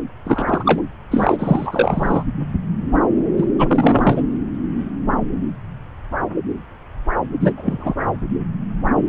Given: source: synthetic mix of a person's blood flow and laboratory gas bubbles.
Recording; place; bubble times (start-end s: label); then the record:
Doppler ultrasound of blood flow; subclavian vein
0.24-0.82 s: bubbles
1.10-2.24 s: bubbles
3.37-3.46 s: bubbles
3.58-4.22 s: bubbles
7.40-7.52 s: bubbles
7.56-7.95 s: bubbles
From the record:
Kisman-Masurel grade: 223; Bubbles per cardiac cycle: several, 3 to 8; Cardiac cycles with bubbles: 10 to 50%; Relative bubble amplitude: loud (0.450 to 0.775); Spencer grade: 2 (many but less than half of the cardiac periods contain bubble signals, singularly or in groups); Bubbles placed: anywhere in the cardiac cycle